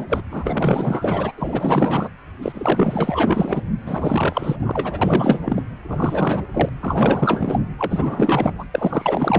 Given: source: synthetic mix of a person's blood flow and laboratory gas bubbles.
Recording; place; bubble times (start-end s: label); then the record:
Doppler ultrasound of blood flow; precordium
0.00-0.06 s: bubbles
0.09-0.21 s: bubbles
0.31-1.32 s: bubbles
1.37-2.09 s: bubbles
2.42-3.61 s: bubbles
3.86-4.56 s: bubbles
4.59-5.62 s: bubbles
5.90-6.44 s: bubbles
6.53-6.70 s: bubbles
6.81-7.64 s: bubbles
7.79-8.53 s: bubbles
8.59-8.65 s: bubbles
8.74-9.39 s: bubbles
From the record:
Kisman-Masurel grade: 444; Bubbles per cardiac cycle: continuous sound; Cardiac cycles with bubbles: 100%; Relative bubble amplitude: maximal (0.775 to 0.999); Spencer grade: 4 (maximum detectable bubble signal sounding continuously throughout systole and diastole of every cardiac period, and overriding the amplitude of the normal cardiac signals); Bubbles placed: anywhere in the cardiac cycle